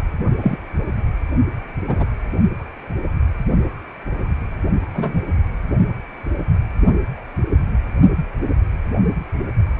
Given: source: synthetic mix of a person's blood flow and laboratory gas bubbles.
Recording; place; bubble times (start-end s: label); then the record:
Doppler ultrasound of blood flow; precordium
0.00-0.03 s: bubbles
0.42-0.58 s: bubbles
1.87-2.05 s: bubbles
4.93-5.22 s: bubbles
From the record:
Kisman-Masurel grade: 123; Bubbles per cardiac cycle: 1 to 2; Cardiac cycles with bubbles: 10 to 50%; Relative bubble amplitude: loud (0.450 to 0.775); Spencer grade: 2 (many but less than half of the cardiac periods contain bubble signals, singularly or in groups); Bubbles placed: only in the low amplitude regions of the cardiac cycle